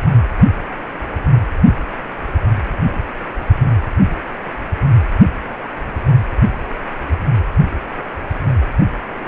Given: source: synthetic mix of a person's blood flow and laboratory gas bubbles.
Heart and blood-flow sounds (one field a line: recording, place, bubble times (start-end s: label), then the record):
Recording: Doppler ultrasound of blood flow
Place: precordium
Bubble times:
no bubbles
From the record:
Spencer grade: 0 (complete lack of bubble signals)